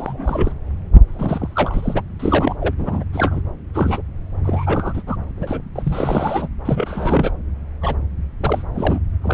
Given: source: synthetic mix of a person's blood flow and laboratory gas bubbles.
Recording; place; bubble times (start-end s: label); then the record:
Doppler ultrasound of blood flow; subclavian vein
0.00-0.52 s: bubbles
1.07-2.02 s: bubbles
2.19-2.75 s: bubbles
2.77-3.04 s: bubbles
3.13-3.40 s: bubbles
3.74-4.01 s: bubbles
4.44-5.03 s: bubbles
5.07-5.16 s: bubbles
5.37-5.62 s: bubbles
5.75-6.48 s: bubbles
6.65-7.32 s: bubbles
7.81-7.96 s: bubbles
8.40-8.65 s: bubbles
8.74-8.99 s: bubbles
9.22-9.34 s: bubbles
From the record:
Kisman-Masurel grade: 342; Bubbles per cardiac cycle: rolling drumbeat, 9 or more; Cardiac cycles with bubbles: 100%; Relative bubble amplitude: moderate (0.250 to 0.450); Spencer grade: 3 (all of the cardiac periods contain showers or single bubble signals, but not dominating or overriding the cardiac motion signals); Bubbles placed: anywhere in the cardiac cycle